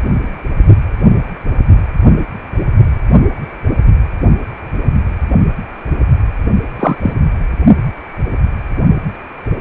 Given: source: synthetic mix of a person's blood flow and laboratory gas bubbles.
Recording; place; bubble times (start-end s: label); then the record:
Doppler ultrasound of blood flow; precordium
6.79-6.96 s: bubbles
7.02-7.13 s: bubbles
From the record:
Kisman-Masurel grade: 113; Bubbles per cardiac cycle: 1 to 2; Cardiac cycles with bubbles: 1 to 10%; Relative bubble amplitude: loud (0.450 to 0.775); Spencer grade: 1 (occasional bubble signal discernible with the cardiac motion signal, with majority of cardiac periods free of bubbles); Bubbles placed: only in the low amplitude regions of the cardiac cycle